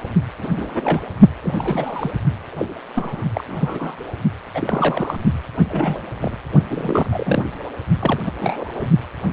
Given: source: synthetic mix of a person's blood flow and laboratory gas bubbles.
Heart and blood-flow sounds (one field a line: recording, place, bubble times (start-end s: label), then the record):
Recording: Doppler ultrasound of blood flow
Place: precordium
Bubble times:
0.37-1.04 s: bubbles
1.42-2.11 s: bubbles
2.52-2.79 s: bubbles
2.95-3.25 s: bubbles
3.35-3.44 s: bubbles
3.47-3.96 s: bubbles
4.54-5.17 s: bubbles
5.68-6.00 s: bubbles
6.21-6.37 s: bubbles
6.67-7.43 s: bubbles
7.99-8.22 s: bubbles
8.26-8.32 s: bubbles
8.38-8.88 s: bubbles
From the record:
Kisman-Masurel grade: 242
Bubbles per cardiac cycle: several, 3 to 8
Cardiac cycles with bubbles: 100%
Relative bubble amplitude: moderate (0.250 to 0.450)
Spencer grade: 3 (all of the cardiac periods contain showers or single bubble signals, but not dominating or overriding the cardiac motion signals)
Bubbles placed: only in the low amplitude regions of the cardiac cycle